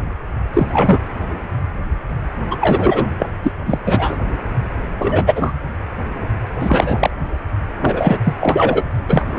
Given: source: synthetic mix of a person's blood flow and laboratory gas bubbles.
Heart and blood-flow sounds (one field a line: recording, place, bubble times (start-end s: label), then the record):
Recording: Doppler ultrasound of blood flow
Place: precordium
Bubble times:
0.53-0.99 s: bubbles
2.50-2.56 s: bubbles
2.60-3.06 s: bubbles
3.19-3.29 s: bubbles
3.42-3.52 s: bubbles
3.66-3.79 s: bubbles
3.86-4.17 s: bubbles
4.99-5.54 s: bubbles
6.59-7.11 s: bubbles
7.80-8.19 s: bubbles
8.23-8.34 s: bubbles
8.39-8.82 s: bubbles
9.07-9.39 s: bubbles
From the record:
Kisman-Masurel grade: 223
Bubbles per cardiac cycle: several, 3 to 8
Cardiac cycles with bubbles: 10 to 50%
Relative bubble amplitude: loud (0.450 to 0.775)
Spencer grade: 2 (many but less than half of the cardiac periods contain bubble signals, singularly or in groups)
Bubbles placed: anywhere in the cardiac cycle